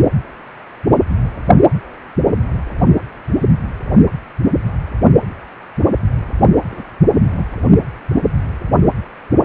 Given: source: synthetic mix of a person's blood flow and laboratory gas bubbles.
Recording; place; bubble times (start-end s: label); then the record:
Doppler ultrasound of blood flow; precordium
6.70-6.84 s: bubbles
7.33-7.45 s: bubbles
From the record:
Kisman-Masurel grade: 111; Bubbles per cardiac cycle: 1 to 2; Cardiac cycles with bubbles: 1 to 10%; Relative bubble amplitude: barely perceptible (0.100 to 0.250); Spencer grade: 1 (occasional bubble signal discernible with the cardiac motion signal, with majority of cardiac periods free of bubbles); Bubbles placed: only in the low amplitude regions of the cardiac cycle